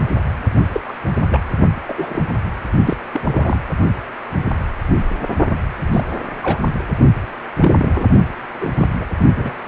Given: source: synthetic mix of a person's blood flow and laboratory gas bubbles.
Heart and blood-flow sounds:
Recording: Doppler ultrasound of blood flow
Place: precordium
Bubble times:
0.73-0.80 s: bubbles
0.88-0.94 s: bubbles
1.29-1.40 s: bubbles
1.88-2.25 s: bubbles
2.83-2.97 s: bubbles
3.13-3.59 s: bubbles
5.92-6.04 s: bubbles
6.42-6.58 s: bubbles
7.61-7.76 s: bubbles
7.79-8.04 s: bubbles
8.61-8.71 s: bubbles
8.77-8.87 s: bubbles
9.01-9.05 s: bubbles
9.37-9.53 s: bubbles
From the record:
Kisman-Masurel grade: 232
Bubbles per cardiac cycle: several, 3 to 8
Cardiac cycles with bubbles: 50 to 99%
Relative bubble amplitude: moderate (0.250 to 0.450)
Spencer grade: 3 (all of the cardiac periods contain showers or single bubble signals, but not dominating or overriding the cardiac motion signals)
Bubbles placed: only in the low amplitude regions of the cardiac cycle

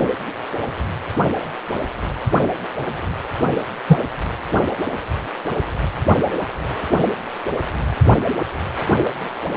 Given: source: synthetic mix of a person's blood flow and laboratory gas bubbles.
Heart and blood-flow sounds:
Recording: Doppler ultrasound of blood flow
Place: precordium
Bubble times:
3.87-3.98 s: bubbles
From the record:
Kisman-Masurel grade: 113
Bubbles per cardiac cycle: 1 to 2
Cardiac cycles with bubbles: 1 to 10%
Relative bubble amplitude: loud (0.450 to 0.775)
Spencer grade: 1 (occasional bubble signal discernible with the cardiac motion signal, with majority of cardiac periods free of bubbles)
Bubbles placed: anywhere in the cardiac cycle

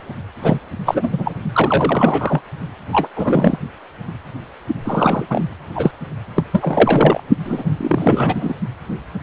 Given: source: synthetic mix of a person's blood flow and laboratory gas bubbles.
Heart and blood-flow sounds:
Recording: Doppler ultrasound of blood flow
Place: precordium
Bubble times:
0.00-0.02 s: bubbles
0.42-0.59 s: bubbles
0.85-1.09 s: bubbles
1.11-1.34 s: bubbles
1.52-2.42 s: bubbles
2.92-3.08 s: bubbles
3.15-3.57 s: bubbles
4.84-5.26 s: bubbles
5.29-5.45 s: bubbles
5.75-5.91 s: bubbles
6.34-6.43 s: bubbles
6.51-7.20 s: bubbles
7.44-7.63 s: bubbles
7.77-8.54 s: bubbles
From the record:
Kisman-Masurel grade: 333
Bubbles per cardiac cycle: rolling drumbeat, 9 or more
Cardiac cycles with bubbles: 50 to 99%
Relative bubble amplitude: loud (0.450 to 0.775)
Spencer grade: 3 (all of the cardiac periods contain showers or single bubble signals, but not dominating or overriding the cardiac motion signals)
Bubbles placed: only in the low amplitude regions of the cardiac cycle

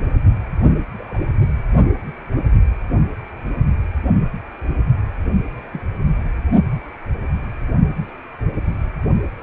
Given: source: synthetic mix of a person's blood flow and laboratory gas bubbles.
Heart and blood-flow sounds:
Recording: Doppler ultrasound of blood flow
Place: precordium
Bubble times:
0.98-1.18 s: bubbles
5.72-5.81 s: bubbles
From the record:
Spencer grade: 2 (many but less than half of the cardiac periods contain bubble signals, singularly or in groups)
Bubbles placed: only in the low amplitude regions of the cardiac cycle

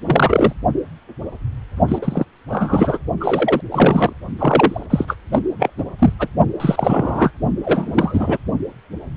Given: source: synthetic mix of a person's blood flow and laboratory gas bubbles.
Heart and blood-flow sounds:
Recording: Doppler ultrasound of blood flow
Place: precordium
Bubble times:
0.05-0.53 s: bubbles
1.88-1.98 s: bubbles
2.02-2.25 s: bubbles
2.50-2.98 s: bubbles
3.20-3.61 s: bubbles
3.71-4.13 s: bubbles
4.38-4.86 s: bubbles
4.89-5.05 s: bubbles
5.07-5.16 s: bubbles
5.32-5.39 s: bubbles
5.59-5.70 s: bubbles
5.78-5.84 s: bubbles
5.98-6.12 s: bubbles
6.19-6.28 s: bubbles
6.60-7.31 s: bubbles
7.64-8.38 s: bubbles
From the record:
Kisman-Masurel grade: 333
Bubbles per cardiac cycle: rolling drumbeat, 9 or more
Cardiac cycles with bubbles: 50 to 99%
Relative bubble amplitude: loud (0.450 to 0.775)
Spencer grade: 3 (all of the cardiac periods contain showers or single bubble signals, but not dominating or overriding the cardiac motion signals)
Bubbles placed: only in the low amplitude regions of the cardiac cycle

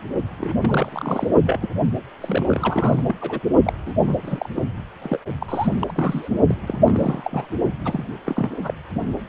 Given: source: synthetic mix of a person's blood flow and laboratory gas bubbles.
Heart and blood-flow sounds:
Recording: Doppler ultrasound of blood flow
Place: precordium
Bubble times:
0.38-0.53 s: bubbles
0.59-1.31 s: bubbles
1.46-1.69 s: bubbles
2.22-3.02 s: bubbles
3.06-3.15 s: bubbles
3.21-3.40 s: bubbles
3.64-3.73 s: bubbles
3.86-3.94 s: bubbles
4.06-4.16 s: bubbles
4.23-4.49 s: bubbles
4.56-4.62 s: bubbles
5.02-5.18 s: bubbles
5.40-5.73 s: bubbles
5.79-6.29 s: bubbles
6.48-6.54 s: bubbles
6.61-6.78 s: bubbles
6.86-7.46 s: bubbles
7.84-8.06 s: bubbles
8.25-8.74 s: bubbles
From the record:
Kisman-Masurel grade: 342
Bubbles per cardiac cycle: rolling drumbeat, 9 or more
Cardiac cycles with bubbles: 100%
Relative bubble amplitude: moderate (0.250 to 0.450)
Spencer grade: 3 (all of the cardiac periods contain showers or single bubble signals, but not dominating or overriding the cardiac motion signals)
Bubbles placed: only in the low amplitude regions of the cardiac cycle

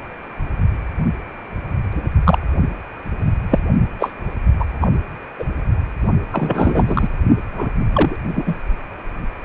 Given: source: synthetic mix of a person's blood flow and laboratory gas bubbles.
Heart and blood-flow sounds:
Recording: Doppler ultrasound of blood flow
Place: precordium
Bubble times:
2.23-2.38 s: bubbles
3.50-3.59 s: bubbles
3.99-4.13 s: bubbles
4.59-4.65 s: bubbles
4.80-4.88 s: bubbles
5.38-5.44 s: bubbles
6.32-7.07 s: bubbles
7.53-7.73 s: bubbles
7.93-8.16 s: bubbles
8.36-8.55 s: bubbles
From the record:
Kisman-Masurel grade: 233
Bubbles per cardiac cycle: several, 3 to 8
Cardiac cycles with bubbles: 50 to 99%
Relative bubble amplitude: loud (0.450 to 0.775)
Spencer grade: 3 (all of the cardiac periods contain showers or single bubble signals, but not dominating or overriding the cardiac motion signals)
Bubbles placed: only in the low amplitude regions of the cardiac cycle

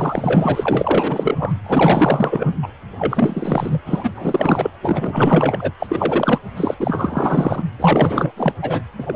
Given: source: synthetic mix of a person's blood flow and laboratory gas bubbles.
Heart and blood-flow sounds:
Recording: Doppler ultrasound of blood flow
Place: precordium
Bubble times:
0.00-1.53 s: bubbles
1.64-2.50 s: bubbles
2.62-2.68 s: bubbles
2.98-3.79 s: bubbles
3.86-4.10 s: bubbles
4.15-4.71 s: bubbles
4.82-5.71 s: bubbles
5.79-6.41 s: bubbles
6.57-6.75 s: bubbles
6.79-7.63 s: bubbles
7.79-8.32 s: bubbles
8.37-8.54 s: bubbles
8.62-8.82 s: bubbles
8.98-9.16 s: bubbles
From the record:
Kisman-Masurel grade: 444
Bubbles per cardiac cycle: continuous sound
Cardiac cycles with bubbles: 100%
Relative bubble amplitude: maximal (0.775 to 0.999)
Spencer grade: 4 (maximum detectable bubble signal sounding continuously throughout systole and diastole of every cardiac period, and overriding the amplitude of the normal cardiac signals)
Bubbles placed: anywhere in the cardiac cycle

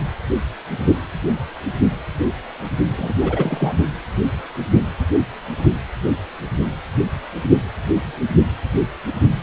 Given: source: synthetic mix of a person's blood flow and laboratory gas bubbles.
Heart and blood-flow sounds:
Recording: Doppler ultrasound of blood flow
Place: precordium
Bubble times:
2.96-3.14 s: bubbles
3.21-3.73 s: bubbles
From the record:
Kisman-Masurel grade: 212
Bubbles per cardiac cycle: several, 3 to 8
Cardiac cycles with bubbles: 1 to 10%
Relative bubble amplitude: moderate (0.250 to 0.450)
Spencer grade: 1 (occasional bubble signal discernible with the cardiac motion signal, with majority of cardiac periods free of bubbles)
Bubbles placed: only in the low amplitude regions of the cardiac cycle

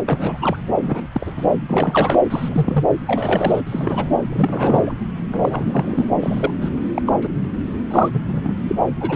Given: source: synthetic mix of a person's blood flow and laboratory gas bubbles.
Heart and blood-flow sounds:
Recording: Doppler ultrasound of blood flow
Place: subclavian vein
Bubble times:
0.07-0.56 s: bubbles
0.82-1.07 s: bubbles
1.12-1.32 s: bubbles
1.36-1.47 s: bubbles
1.68-2.22 s: bubbles
2.29-2.84 s: bubbles
3.07-3.62 s: bubbles
3.67-4.09 s: bubbles
4.32-4.93 s: bubbles
5.31-6.10 s: bubbles
6.21-6.50 s: bubbles
6.61-6.69 s: bubbles
6.96-7.02 s: bubbles
7.06-7.13 s: bubbles
7.21-7.29 s: bubbles
7.90-8.54 s: bubbles
8.67-8.75 s: bubbles
9.00-9.16 s: bubbles
From the record:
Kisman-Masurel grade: 242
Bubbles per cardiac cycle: several, 3 to 8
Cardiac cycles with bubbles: 100%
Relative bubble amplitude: moderate (0.250 to 0.450)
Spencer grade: 3 (all of the cardiac periods contain showers or single bubble signals, but not dominating or overriding the cardiac motion signals)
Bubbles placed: anywhere in the cardiac cycle

